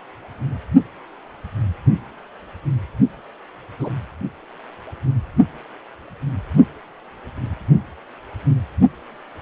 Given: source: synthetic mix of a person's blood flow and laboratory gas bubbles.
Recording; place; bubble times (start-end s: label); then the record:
Doppler ultrasound of blood flow; precordium
3.79-3.90 s: bubbles
From the record:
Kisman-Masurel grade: 122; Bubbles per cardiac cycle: 1 to 2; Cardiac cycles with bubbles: 10 to 50%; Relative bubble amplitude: moderate (0.250 to 0.450); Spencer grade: 2 (many but less than half of the cardiac periods contain bubble signals, singularly or in groups); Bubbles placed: only in the low amplitude regions of the cardiac cycle